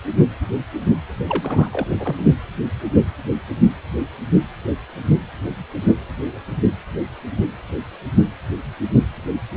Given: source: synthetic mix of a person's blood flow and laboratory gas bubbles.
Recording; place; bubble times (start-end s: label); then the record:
Doppler ultrasound of blood flow; precordium
1.29-2.27 s: bubbles
From the record:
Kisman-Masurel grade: 222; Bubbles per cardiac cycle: several, 3 to 8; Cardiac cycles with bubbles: 10 to 50%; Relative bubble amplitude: moderate (0.250 to 0.450); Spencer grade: 2 (many but less than half of the cardiac periods contain bubble signals, singularly or in groups); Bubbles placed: anywhere in the cardiac cycle